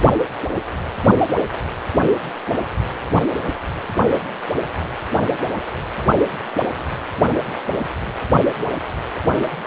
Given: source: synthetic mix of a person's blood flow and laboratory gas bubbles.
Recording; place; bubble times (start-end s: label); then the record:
Doppler ultrasound of blood flow; precordium
no bubbles
From the record:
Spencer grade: 0 (complete lack of bubble signals)